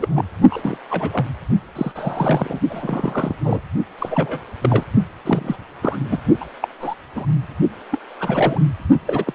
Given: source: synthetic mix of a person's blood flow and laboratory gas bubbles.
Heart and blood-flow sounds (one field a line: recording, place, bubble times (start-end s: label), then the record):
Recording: Doppler ultrasound of blood flow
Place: precordium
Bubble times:
0.00-0.24 s: bubbles
0.50-0.77 s: bubbles
0.91-1.26 s: bubbles
1.75-1.92 s: bubbles
1.95-2.59 s: bubbles
2.69-3.36 s: bubbles
3.42-3.60 s: bubbles
3.98-4.41 s: bubbles
4.62-4.84 s: bubbles
5.25-5.56 s: bubbles
5.82-5.98 s: bubbles
6.04-6.18 s: bubbles
6.40-6.44 s: bubbles
6.62-6.68 s: bubbles
6.81-6.95 s: bubbles
7.15-7.26 s: bubbles
7.91-7.98 s: bubbles
8.20-8.61 s: bubbles
9.06-9.33 s: bubbles
From the record:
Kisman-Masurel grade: 242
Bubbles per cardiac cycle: several, 3 to 8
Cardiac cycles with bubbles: 100%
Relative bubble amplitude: moderate (0.250 to 0.450)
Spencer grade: 3 (all of the cardiac periods contain showers or single bubble signals, but not dominating or overriding the cardiac motion signals)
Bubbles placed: only in the low amplitude regions of the cardiac cycle